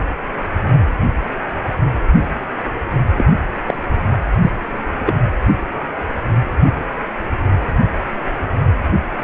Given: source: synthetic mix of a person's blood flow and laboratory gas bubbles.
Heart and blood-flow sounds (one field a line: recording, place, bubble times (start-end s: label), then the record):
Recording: Doppler ultrasound of blood flow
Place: precordium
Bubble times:
3.17-3.26 s: bubbles
3.67-3.76 s: bubbles
4.42-4.51 s: bubbles
5.06-5.14 s: bubbles
From the record:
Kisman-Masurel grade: 123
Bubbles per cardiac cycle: 1 to 2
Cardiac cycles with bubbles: 10 to 50%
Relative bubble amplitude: loud (0.450 to 0.775)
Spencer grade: 2 (many but less than half of the cardiac periods contain bubble signals, singularly or in groups)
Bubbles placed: anywhere in the cardiac cycle